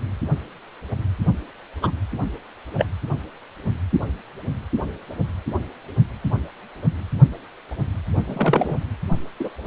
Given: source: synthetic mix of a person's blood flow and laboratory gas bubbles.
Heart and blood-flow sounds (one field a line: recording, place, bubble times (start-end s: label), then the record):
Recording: Doppler ultrasound of blood flow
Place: precordium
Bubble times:
1.82-1.91 s: bubbles
2.77-2.84 s: bubbles
8.27-8.78 s: bubbles
9.39-9.49 s: bubbles
From the record:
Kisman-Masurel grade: 123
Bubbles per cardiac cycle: 1 to 2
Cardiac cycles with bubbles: 10 to 50%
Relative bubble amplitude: loud (0.450 to 0.775)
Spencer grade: 2 (many but less than half of the cardiac periods contain bubble signals, singularly or in groups)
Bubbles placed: only in the low amplitude regions of the cardiac cycle